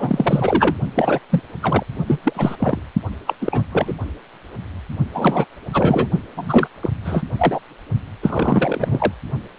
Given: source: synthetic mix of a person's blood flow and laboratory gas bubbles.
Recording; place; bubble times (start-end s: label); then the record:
Doppler ultrasound of blood flow; precordium
0.00-0.76 s: bubbles
0.94-1.20 s: bubbles
1.29-1.42 s: bubbles
1.62-1.83 s: bubbles
2.07-2.18 s: bubbles
2.23-2.56 s: bubbles
2.59-2.81 s: bubbles
3.27-3.36 s: bubbles
3.41-3.64 s: bubbles
3.72-3.94 s: bubbles
5.13-5.46 s: bubbles
5.73-6.08 s: bubbles
6.37-6.67 s: bubbles
6.82-6.90 s: bubbles
7.04-7.23 s: bubbles
7.38-7.60 s: bubbles
8.22-9.12 s: bubbles
From the record:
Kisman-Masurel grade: 333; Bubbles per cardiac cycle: rolling drumbeat, 9 or more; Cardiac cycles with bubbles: 50 to 99%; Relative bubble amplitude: loud (0.450 to 0.775); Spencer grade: 3 (all of the cardiac periods contain showers or single bubble signals, but not dominating or overriding the cardiac motion signals); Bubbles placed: only in the low amplitude regions of the cardiac cycle